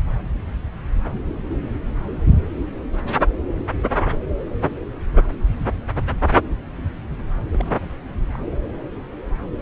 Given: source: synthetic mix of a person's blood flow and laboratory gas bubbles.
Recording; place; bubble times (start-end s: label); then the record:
Doppler ultrasound of blood flow; subclavian vein
7.37-7.39 s: bubbles
7.53-7.89 s: bubbles
8.34-8.37 s: bubbles
From the record:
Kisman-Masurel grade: 221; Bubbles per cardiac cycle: several, 3 to 8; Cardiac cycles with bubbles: 10 to 50%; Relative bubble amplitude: barely perceptible (0.100 to 0.250); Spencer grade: 2 (many but less than half of the cardiac periods contain bubble signals, singularly or in groups); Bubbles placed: anywhere in the cardiac cycle